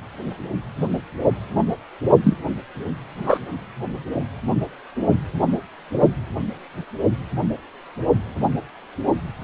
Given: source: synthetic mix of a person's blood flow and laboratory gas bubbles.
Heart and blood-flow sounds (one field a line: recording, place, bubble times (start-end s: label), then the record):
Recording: Doppler ultrasound of blood flow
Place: precordium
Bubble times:
2.24-2.39 s: bubbles
3.15-3.38 s: bubbles
From the record:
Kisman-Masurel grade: 213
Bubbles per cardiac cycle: several, 3 to 8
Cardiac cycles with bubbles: 1 to 10%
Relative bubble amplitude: loud (0.450 to 0.775)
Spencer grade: 1 (occasional bubble signal discernible with the cardiac motion signal, with majority of cardiac periods free of bubbles)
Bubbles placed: only in the low amplitude regions of the cardiac cycle